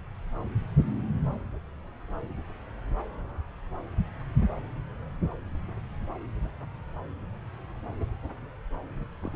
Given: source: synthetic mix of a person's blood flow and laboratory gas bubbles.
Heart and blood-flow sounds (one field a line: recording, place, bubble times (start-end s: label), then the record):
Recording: Doppler ultrasound of blood flow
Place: subclavian vein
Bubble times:
9.21-9.36 s: bubbles
From the record:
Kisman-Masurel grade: 211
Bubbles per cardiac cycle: several, 3 to 8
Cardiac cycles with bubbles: 1 to 10%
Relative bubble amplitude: barely perceptible (0.100 to 0.250)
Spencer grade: 1 (occasional bubble signal discernible with the cardiac motion signal, with majority of cardiac periods free of bubbles)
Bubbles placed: anywhere in the cardiac cycle